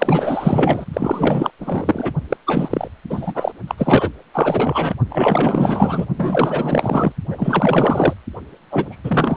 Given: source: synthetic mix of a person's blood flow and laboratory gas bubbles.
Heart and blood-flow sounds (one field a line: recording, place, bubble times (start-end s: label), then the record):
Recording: Doppler ultrasound of blood flow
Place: precordium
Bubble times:
0.00-0.85 s: bubbles
0.93-1.51 s: bubbles
1.60-2.12 s: bubbles
2.29-2.37 s: bubbles
2.46-2.88 s: bubbles
3.10-3.52 s: bubbles
3.67-3.75 s: bubbles
3.78-4.09 s: bubbles
4.33-4.94 s: bubbles
5.09-6.05 s: bubbles
6.17-7.12 s: bubbles
7.29-8.13 s: bubbles
8.70-8.99 s: bubbles
9.04-9.37 s: bubbles
From the record:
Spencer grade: 4 (maximum detectable bubble signal sounding continuously throughout systole and diastole of every cardiac period, and overriding the amplitude of the normal cardiac signals)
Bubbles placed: only in the low amplitude regions of the cardiac cycle